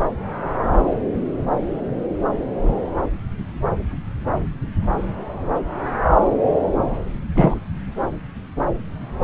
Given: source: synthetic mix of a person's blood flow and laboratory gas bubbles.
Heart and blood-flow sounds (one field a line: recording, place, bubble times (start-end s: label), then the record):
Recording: Doppler ultrasound of blood flow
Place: subclavian vein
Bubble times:
7.35-7.55 s: bubbles
From the record:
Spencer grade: 1 (occasional bubble signal discernible with the cardiac motion signal, with majority of cardiac periods free of bubbles)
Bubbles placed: anywhere in the cardiac cycle